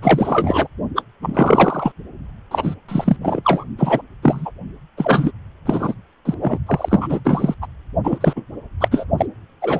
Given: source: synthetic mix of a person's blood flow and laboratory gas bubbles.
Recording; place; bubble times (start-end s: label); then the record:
Doppler ultrasound of blood flow; precordium
0.02-0.68 s: bubbles
0.95-1.02 s: bubbles
1.22-1.92 s: bubbles
2.51-2.75 s: bubbles
2.88-3.17 s: bubbles
3.21-3.41 s: bubbles
3.44-3.64 s: bubbles
3.78-4.02 s: bubbles
4.23-4.52 s: bubbles
4.97-5.32 s: bubbles
5.66-5.95 s: bubbles
6.25-6.34 s: bubbles
6.40-6.58 s: bubbles
6.67-7.20 s: bubbles
7.25-7.54 s: bubbles
7.62-7.67 s: bubbles
8.04-8.42 s: bubbles
8.80-8.88 s: bubbles
8.91-9.05 s: bubbles
9.18-9.26 s: bubbles
9.61-9.80 s: bubbles
From the record:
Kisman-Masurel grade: 343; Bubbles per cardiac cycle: rolling drumbeat, 9 or more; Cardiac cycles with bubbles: 100%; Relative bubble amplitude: loud (0.450 to 0.775); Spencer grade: 3 (all of the cardiac periods contain showers or single bubble signals, but not dominating or overriding the cardiac motion signals); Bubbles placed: only in the low amplitude regions of the cardiac cycle